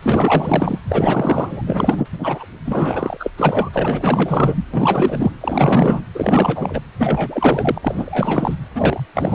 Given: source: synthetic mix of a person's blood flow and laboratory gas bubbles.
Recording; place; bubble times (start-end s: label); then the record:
Doppler ultrasound of blood flow; precordium
0.02-0.79 s: bubbles
0.89-1.62 s: bubbles
1.65-2.07 s: bubbles
2.12-2.46 s: bubbles
2.65-3.30 s: bubbles
3.37-3.69 s: bubbles
3.73-4.65 s: bubbles
4.74-5.32 s: bubbles
5.41-6.04 s: bubbles
6.14-6.81 s: bubbles
6.98-7.79 s: bubbles
7.81-8.56 s: bubbles
8.75-9.00 s: bubbles
9.14-9.35 s: bubbles
From the record:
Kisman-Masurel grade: 444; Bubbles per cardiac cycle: continuous sound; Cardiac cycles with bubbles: 100%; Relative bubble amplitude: maximal (0.775 to 0.999); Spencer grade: 4 (maximum detectable bubble signal sounding continuously throughout systole and diastole of every cardiac period, and overriding the amplitude of the normal cardiac signals); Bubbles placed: anywhere in the cardiac cycle